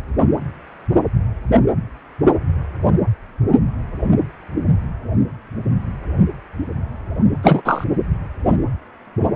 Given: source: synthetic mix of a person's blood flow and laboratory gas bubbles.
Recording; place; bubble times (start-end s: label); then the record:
Doppler ultrasound of blood flow; precordium
7.42-7.62 s: bubbles
7.65-7.84 s: bubbles
From the record:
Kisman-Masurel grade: 213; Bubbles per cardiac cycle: several, 3 to 8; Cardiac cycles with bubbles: 1 to 10%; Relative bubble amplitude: loud (0.450 to 0.775); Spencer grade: 1 (occasional bubble signal discernible with the cardiac motion signal, with majority of cardiac periods free of bubbles); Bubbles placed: anywhere in the cardiac cycle